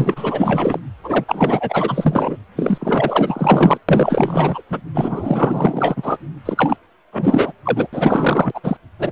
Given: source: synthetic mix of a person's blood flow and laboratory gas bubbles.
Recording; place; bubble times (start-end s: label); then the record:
Doppler ultrasound of blood flow; precordium
0.00-0.80 s: bubbles
1.03-1.24 s: bubbles
1.27-2.38 s: bubbles
2.55-3.78 s: bubbles
3.89-4.62 s: bubbles
4.70-4.81 s: bubbles
4.94-6.18 s: bubbles
6.46-6.77 s: bubbles
7.12-7.53 s: bubbles
7.65-7.87 s: bubbles
7.92-8.60 s: bubbles
8.63-8.77 s: bubbles
8.99-9.11 s: bubbles
From the record:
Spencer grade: 4 (maximum detectable bubble signal sounding continuously throughout systole and diastole of every cardiac period, and overriding the amplitude of the normal cardiac signals); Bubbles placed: anywhere in the cardiac cycle